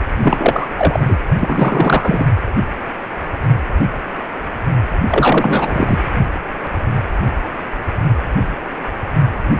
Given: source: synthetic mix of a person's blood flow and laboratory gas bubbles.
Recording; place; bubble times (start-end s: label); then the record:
Doppler ultrasound of blood flow; precordium
0.22-0.67 s: bubbles
0.76-1.17 s: bubbles
1.40-2.27 s: bubbles
5.08-6.00 s: bubbles
From the record:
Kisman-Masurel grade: 333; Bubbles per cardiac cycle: rolling drumbeat, 9 or more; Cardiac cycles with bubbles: 50 to 99%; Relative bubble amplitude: loud (0.450 to 0.775); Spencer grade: 3 (all of the cardiac periods contain showers or single bubble signals, but not dominating or overriding the cardiac motion signals); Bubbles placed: anywhere in the cardiac cycle